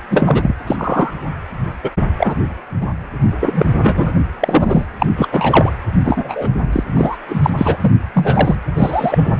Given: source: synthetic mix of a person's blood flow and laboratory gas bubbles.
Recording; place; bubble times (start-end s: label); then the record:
Doppler ultrasound of blood flow; precordium
0.10-0.55 s: bubbles
0.66-1.12 s: bubbles
1.83-1.91 s: bubbles
2.18-2.35 s: bubbles
2.81-2.87 s: bubbles
3.40-3.66 s: bubbles
3.81-4.13 s: bubbles
4.39-4.86 s: bubbles
4.98-5.06 s: bubbles
5.17-5.28 s: bubbles
5.31-5.72 s: bubbles
6.04-6.49 s: bubbles
6.72-6.83 s: bubbles
6.96-7.17 s: bubbles
7.28-7.50 s: bubbles
7.57-7.77 s: bubbles
7.80-7.92 s: bubbles
8.14-8.56 s: bubbles
8.76-9.33 s: bubbles
From the record:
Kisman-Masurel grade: 243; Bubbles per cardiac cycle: several, 3 to 8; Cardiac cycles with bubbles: 100%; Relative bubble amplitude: loud (0.450 to 0.775); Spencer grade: 3 (all of the cardiac periods contain showers or single bubble signals, but not dominating or overriding the cardiac motion signals); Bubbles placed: anywhere in the cardiac cycle